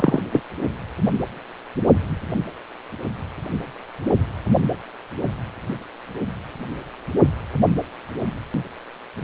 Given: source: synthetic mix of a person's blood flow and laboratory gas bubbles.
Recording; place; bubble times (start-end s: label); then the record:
Doppler ultrasound of blood flow; precordium
0.00-0.23 s: bubbles
0.32-0.40 s: bubbles
From the record:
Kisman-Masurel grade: 213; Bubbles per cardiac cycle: several, 3 to 8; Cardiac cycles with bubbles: 1 to 10%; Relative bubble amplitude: loud (0.450 to 0.775); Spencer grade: 1 (occasional bubble signal discernible with the cardiac motion signal, with majority of cardiac periods free of bubbles); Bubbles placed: only in the low amplitude regions of the cardiac cycle